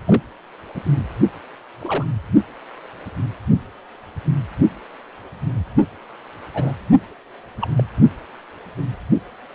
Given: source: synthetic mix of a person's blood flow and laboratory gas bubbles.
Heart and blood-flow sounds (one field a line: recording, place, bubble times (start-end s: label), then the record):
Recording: Doppler ultrasound of blood flow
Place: precordium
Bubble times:
0.07-0.21 s: bubbles
0.75-0.81 s: bubbles
1.80-2.05 s: bubbles
6.54-6.73 s: bubbles
7.61-7.69 s: bubbles
7.77-7.83 s: bubbles
From the record:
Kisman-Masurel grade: 122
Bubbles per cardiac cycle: 1 to 2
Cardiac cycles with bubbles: 10 to 50%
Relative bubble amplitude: moderate (0.250 to 0.450)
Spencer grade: 2 (many but less than half of the cardiac periods contain bubble signals, singularly or in groups)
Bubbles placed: only in the low amplitude regions of the cardiac cycle